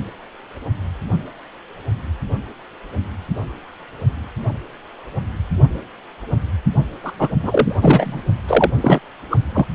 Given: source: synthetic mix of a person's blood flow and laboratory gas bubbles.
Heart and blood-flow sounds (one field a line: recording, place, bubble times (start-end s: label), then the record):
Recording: Doppler ultrasound of blood flow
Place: precordium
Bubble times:
7.04-7.13 s: bubbles
7.19-7.29 s: bubbles
7.42-7.77 s: bubbles
7.82-8.21 s: bubbles
8.47-8.71 s: bubbles
8.80-8.99 s: bubbles
9.30-9.38 s: bubbles
9.53-9.66 s: bubbles
From the record:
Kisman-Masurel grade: 223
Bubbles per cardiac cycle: several, 3 to 8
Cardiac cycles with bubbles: 10 to 50%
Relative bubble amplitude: loud (0.450 to 0.775)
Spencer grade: 2 (many but less than half of the cardiac periods contain bubble signals, singularly or in groups)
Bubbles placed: only in the low amplitude regions of the cardiac cycle